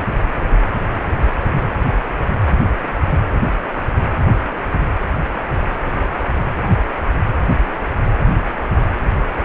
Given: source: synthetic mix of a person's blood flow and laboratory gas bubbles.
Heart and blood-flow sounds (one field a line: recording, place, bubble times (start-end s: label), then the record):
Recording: Doppler ultrasound of blood flow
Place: precordium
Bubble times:
no bubbles
From the record:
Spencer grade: 0 (complete lack of bubble signals)